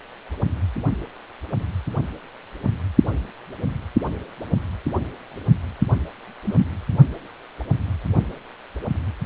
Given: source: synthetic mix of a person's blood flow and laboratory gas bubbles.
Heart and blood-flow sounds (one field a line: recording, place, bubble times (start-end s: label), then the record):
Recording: Doppler ultrasound of blood flow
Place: precordium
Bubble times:
6.44-6.65 s: bubbles
From the record:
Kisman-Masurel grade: 112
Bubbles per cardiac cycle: 1 to 2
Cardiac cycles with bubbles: 1 to 10%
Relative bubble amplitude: moderate (0.250 to 0.450)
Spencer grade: 1 (occasional bubble signal discernible with the cardiac motion signal, with majority of cardiac periods free of bubbles)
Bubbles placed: only in the low amplitude regions of the cardiac cycle